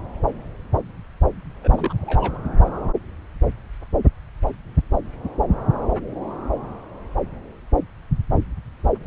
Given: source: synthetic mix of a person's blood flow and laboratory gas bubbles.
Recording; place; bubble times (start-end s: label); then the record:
Doppler ultrasound of blood flow; subclavian vein
1.63-1.94 s: bubbles
2.02-2.38 s: bubbles
From the record:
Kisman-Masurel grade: 211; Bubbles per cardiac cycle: several, 3 to 8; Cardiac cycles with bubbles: 1 to 10%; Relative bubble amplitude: barely perceptible (0.100 to 0.250); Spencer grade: 1 (occasional bubble signal discernible with the cardiac motion signal, with majority of cardiac periods free of bubbles); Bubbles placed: anywhere in the cardiac cycle